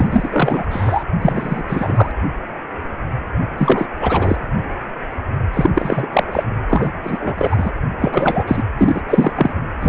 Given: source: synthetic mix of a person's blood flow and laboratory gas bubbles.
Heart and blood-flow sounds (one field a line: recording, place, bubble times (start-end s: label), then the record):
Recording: Doppler ultrasound of blood flow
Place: precordium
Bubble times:
0.00-0.29 s: bubbles
0.32-1.04 s: bubbles
1.21-1.64 s: bubbles
1.68-2.12 s: bubbles
3.58-3.87 s: bubbles
4.00-4.36 s: bubbles
5.54-5.70 s: bubbles
5.75-6.09 s: bubbles
6.12-6.24 s: bubbles
6.32-6.43 s: bubbles
6.69-6.92 s: bubbles
7.04-7.71 s: bubbles
7.99-8.44 s: bubbles
8.47-8.63 s: bubbles
8.78-9.02 s: bubbles
9.09-9.33 s: bubbles
9.36-9.53 s: bubbles
9.80-9.89 s: bubbles
From the record:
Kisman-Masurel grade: 333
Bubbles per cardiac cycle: rolling drumbeat, 9 or more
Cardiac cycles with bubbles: 50 to 99%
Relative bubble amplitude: loud (0.450 to 0.775)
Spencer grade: 3 (all of the cardiac periods contain showers or single bubble signals, but not dominating or overriding the cardiac motion signals)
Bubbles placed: anywhere in the cardiac cycle